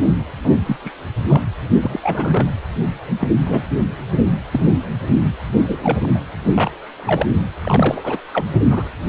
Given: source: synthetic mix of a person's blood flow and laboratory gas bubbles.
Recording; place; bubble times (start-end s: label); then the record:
Doppler ultrasound of blood flow; precordium
0.00-0.12 s: bubbles
0.43-0.56 s: bubbles
0.66-0.77 s: bubbles
0.85-0.90 s: bubbles
1.29-1.42 s: bubbles
1.82-1.99 s: bubbles
2.02-2.48 s: bubbles
3.19-3.28 s: bubbles
3.42-3.65 s: bubbles
4.17-4.23 s: bubbles
4.51-4.67 s: bubbles
5.62-5.77 s: bubbles
5.83-6.20 s: bubbles
6.56-6.70 s: bubbles
6.94-7.28 s: bubbles
7.62-8.18 s: bubbles
8.31-8.45 s: bubbles
8.70-8.83 s: bubbles
From the record:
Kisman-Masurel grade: 242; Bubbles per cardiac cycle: several, 3 to 8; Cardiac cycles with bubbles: 100%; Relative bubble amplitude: moderate (0.250 to 0.450); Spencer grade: 3 (all of the cardiac periods contain showers or single bubble signals, but not dominating or overriding the cardiac motion signals); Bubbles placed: anywhere in the cardiac cycle